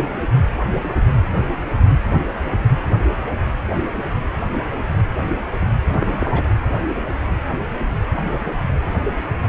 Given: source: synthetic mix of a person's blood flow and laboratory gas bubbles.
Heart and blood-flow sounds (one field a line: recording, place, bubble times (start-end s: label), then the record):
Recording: Doppler ultrasound of blood flow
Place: precordium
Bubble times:
5.90-6.49 s: bubbles
From the record:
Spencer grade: 1 (occasional bubble signal discernible with the cardiac motion signal, with majority of cardiac periods free of bubbles)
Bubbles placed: anywhere in the cardiac cycle